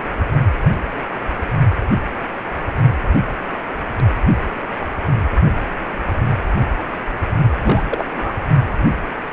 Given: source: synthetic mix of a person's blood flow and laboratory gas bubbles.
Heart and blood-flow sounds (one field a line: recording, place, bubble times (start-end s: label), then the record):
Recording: Doppler ultrasound of blood flow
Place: precordium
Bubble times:
7.61-7.83 s: bubbles
7.91-8.33 s: bubbles
From the record:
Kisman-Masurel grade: 222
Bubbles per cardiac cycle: several, 3 to 8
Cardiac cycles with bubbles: 10 to 50%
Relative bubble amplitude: moderate (0.250 to 0.450)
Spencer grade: 2 (many but less than half of the cardiac periods contain bubble signals, singularly or in groups)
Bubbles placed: only in the low amplitude regions of the cardiac cycle